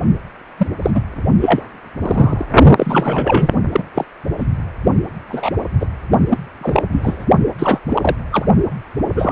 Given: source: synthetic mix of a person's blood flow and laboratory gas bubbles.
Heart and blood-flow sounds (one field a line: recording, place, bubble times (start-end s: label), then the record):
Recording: Doppler ultrasound of blood flow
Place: precordium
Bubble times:
0.57-0.67 s: bubbles
0.82-0.91 s: bubbles
0.94-1.01 s: bubbles
1.41-1.61 s: bubbles
2.01-2.46 s: bubbles
2.77-3.49 s: bubbles
3.72-3.84 s: bubbles
3.94-4.05 s: bubbles
4.38-4.46 s: bubbles
5.28-5.51 s: bubbles
5.80-5.86 s: bubbles
6.28-6.38 s: bubbles
6.61-6.83 s: bubbles
6.92-7.25 s: bubbles
7.58-7.80 s: bubbles
7.88-8.16 s: bubbles
8.32-8.46 s: bubbles
9.13-9.32 s: bubbles
From the record:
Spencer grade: 3 (all of the cardiac periods contain showers or single bubble signals, but not dominating or overriding the cardiac motion signals)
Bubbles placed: only in the low amplitude regions of the cardiac cycle